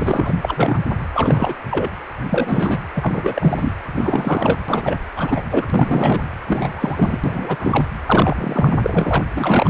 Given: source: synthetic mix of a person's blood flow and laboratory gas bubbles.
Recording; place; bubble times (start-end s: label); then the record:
Doppler ultrasound of blood flow; precordium
0.00-0.34 s: bubbles
0.42-0.80 s: bubbles
1.14-1.54 s: bubbles
1.70-1.90 s: bubbles
2.30-2.78 s: bubbles
2.94-3.73 s: bubbles
3.95-4.58 s: bubbles
4.68-4.96 s: bubbles
5.16-5.41 s: bubbles
5.51-6.22 s: bubbles
6.46-7.18 s: bubbles
7.23-7.86 s: bubbles
8.05-8.78 s: bubbles
8.82-9.24 s: bubbles
9.34-9.70 s: bubbles
From the record:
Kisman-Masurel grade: 343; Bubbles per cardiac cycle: rolling drumbeat, 9 or more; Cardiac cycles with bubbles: 100%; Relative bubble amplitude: loud (0.450 to 0.775); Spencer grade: 3 (all of the cardiac periods contain showers or single bubble signals, but not dominating or overriding the cardiac motion signals); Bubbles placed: anywhere in the cardiac cycle